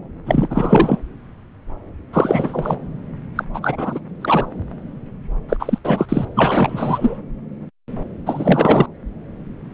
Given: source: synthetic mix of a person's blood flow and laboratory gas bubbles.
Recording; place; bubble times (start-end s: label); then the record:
Doppler ultrasound of blood flow; subclavian vein
0.26-0.99 s: bubbles
2.12-2.79 s: bubbles
3.35-3.45 s: bubbles
3.54-4.00 s: bubbles
4.21-4.46 s: bubbles
5.49-5.57 s: bubbles
5.59-5.79 s: bubbles
5.84-6.05 s: bubbles
6.08-6.25 s: bubbles
6.36-7.17 s: bubbles
8.26-8.86 s: bubbles
From the record:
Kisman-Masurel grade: 333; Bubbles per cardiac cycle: rolling drumbeat, 9 or more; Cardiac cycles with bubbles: 50 to 99%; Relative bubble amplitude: loud (0.450 to 0.775); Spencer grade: 3 (all of the cardiac periods contain showers or single bubble signals, but not dominating or overriding the cardiac motion signals); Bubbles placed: anywhere in the cardiac cycle